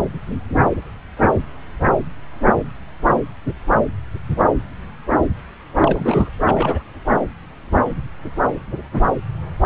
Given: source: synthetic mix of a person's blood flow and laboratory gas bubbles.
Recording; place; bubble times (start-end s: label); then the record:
Doppler ultrasound of blood flow; subclavian vein
5.80-6.30 s: bubbles
6.45-6.83 s: bubbles
From the record:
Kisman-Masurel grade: 212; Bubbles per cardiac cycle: several, 3 to 8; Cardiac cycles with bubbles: 1 to 10%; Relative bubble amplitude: moderate (0.250 to 0.450); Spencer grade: 1 (occasional bubble signal discernible with the cardiac motion signal, with majority of cardiac periods free of bubbles); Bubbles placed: anywhere in the cardiac cycle